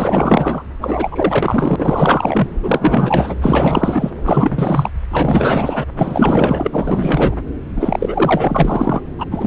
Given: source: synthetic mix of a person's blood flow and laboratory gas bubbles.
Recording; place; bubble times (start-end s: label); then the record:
Doppler ultrasound of blood flow; subclavian vein
0.00-0.63 s: bubbles
0.81-2.47 s: bubbles
2.62-3.36 s: bubbles
3.41-4.11 s: bubbles
4.24-4.90 s: bubbles
5.10-5.85 s: bubbles
5.96-7.36 s: bubbles
7.76-9.00 s: bubbles
9.18-9.26 s: bubbles
9.30-9.47 s: bubbles
From the record:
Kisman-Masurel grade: 444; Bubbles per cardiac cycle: continuous sound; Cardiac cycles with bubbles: 100%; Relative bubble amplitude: maximal (0.775 to 0.999); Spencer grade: 4 (maximum detectable bubble signal sounding continuously throughout systole and diastole of every cardiac period, and overriding the amplitude of the normal cardiac signals); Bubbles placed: anywhere in the cardiac cycle